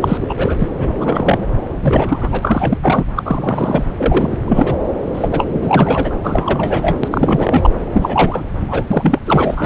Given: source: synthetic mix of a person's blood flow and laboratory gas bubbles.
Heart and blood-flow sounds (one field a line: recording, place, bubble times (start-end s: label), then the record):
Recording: Doppler ultrasound of blood flow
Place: subclavian vein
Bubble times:
0.01-0.18 s: bubbles
0.21-0.34 s: bubbles
0.37-0.55 s: bubbles
0.58-0.68 s: bubbles
0.79-0.95 s: bubbles
0.99-1.46 s: bubbles
1.82-2.39 s: bubbles
2.42-3.04 s: bubbles
3.16-3.84 s: bubbles
3.98-4.38 s: bubbles
4.47-4.74 s: bubbles
5.13-5.28 s: bubbles
5.31-5.46 s: bubbles
5.49-6.15 s: bubbles
6.23-6.97 s: bubbles
7.03-7.70 s: bubbles
7.92-8.43 s: bubbles
8.68-8.85 s: bubbles
8.90-9.19 s: bubbles
9.26-9.66 s: bubbles
From the record:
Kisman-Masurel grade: 343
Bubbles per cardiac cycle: rolling drumbeat, 9 or more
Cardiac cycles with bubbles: 100%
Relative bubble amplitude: loud (0.450 to 0.775)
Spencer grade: 3 (all of the cardiac periods contain showers or single bubble signals, but not dominating or overriding the cardiac motion signals)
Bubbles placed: anywhere in the cardiac cycle